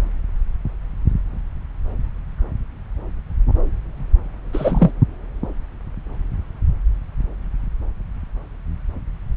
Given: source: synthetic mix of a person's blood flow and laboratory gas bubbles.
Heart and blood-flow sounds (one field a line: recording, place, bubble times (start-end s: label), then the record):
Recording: Doppler ultrasound of blood flow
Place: subclavian vein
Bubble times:
4.53-4.90 s: bubbles
From the record:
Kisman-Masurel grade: 113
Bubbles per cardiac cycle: 1 to 2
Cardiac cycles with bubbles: 1 to 10%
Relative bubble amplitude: loud (0.450 to 0.775)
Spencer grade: 1 (occasional bubble signal discernible with the cardiac motion signal, with majority of cardiac periods free of bubbles)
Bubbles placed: anywhere in the cardiac cycle